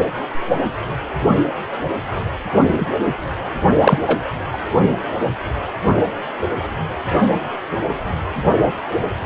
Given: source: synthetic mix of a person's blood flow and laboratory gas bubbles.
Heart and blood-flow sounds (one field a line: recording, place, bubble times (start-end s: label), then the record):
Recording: Doppler ultrasound of blood flow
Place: precordium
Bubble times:
2.79-2.87 s: bubbles
3.81-3.98 s: bubbles
4.07-4.18 s: bubbles
4.52-4.58 s: bubbles
From the record:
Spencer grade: 2 (many but less than half of the cardiac periods contain bubble signals, singularly or in groups)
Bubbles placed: only in the low amplitude regions of the cardiac cycle